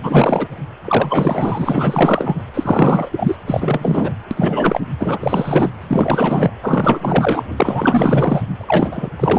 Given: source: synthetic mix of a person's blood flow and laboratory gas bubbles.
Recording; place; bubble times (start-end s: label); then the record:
Doppler ultrasound of blood flow; precordium
0.02-0.48 s: bubbles
0.84-2.41 s: bubbles
2.54-3.37 s: bubbles
3.47-4.12 s: bubbles
4.30-4.80 s: bubbles
5.00-5.70 s: bubbles
5.80-6.53 s: bubbles
6.62-7.43 s: bubbles
7.57-8.42 s: bubbles
8.55-9.09 s: bubbles
9.19-9.39 s: bubbles
From the record:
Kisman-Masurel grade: 444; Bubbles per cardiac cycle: continuous sound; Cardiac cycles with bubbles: 100%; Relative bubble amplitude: maximal (0.775 to 0.999); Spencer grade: 4 (maximum detectable bubble signal sounding continuously throughout systole and diastole of every cardiac period, and overriding the amplitude of the normal cardiac signals); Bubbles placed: anywhere in the cardiac cycle